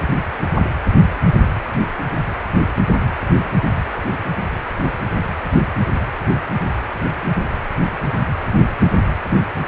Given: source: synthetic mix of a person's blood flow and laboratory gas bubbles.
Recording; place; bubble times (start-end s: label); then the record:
Doppler ultrasound of blood flow; precordium
no bubbles
From the record:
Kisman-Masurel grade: 000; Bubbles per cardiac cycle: 0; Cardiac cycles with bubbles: 0%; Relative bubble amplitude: no bubbles discernible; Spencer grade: 0 (complete lack of bubble signals)